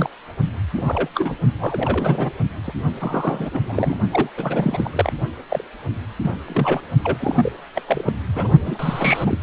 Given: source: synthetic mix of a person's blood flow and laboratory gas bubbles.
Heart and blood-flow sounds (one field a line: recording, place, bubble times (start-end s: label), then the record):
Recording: Doppler ultrasound of blood flow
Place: precordium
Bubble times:
0.00-0.10 s: bubbles
0.74-1.08 s: bubbles
1.15-1.36 s: bubbles
1.59-2.30 s: bubbles
2.67-2.72 s: bubbles
3.00-3.50 s: bubbles
3.53-3.97 s: bubbles
4.11-4.29 s: bubbles
4.37-4.90 s: bubbles
4.93-5.12 s: bubbles
5.49-5.64 s: bubbles
6.22-6.35 s: bubbles
6.48-6.81 s: bubbles
7.04-7.52 s: bubbles
7.75-7.82 s: bubbles
7.87-8.12 s: bubbles
8.35-8.54 s: bubbles
8.66-9.38 s: bubbles
From the record:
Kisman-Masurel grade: 342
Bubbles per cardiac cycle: rolling drumbeat, 9 or more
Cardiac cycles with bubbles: 100%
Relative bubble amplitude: moderate (0.250 to 0.450)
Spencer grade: 3 (all of the cardiac periods contain showers or single bubble signals, but not dominating or overriding the cardiac motion signals)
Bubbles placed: only in the low amplitude regions of the cardiac cycle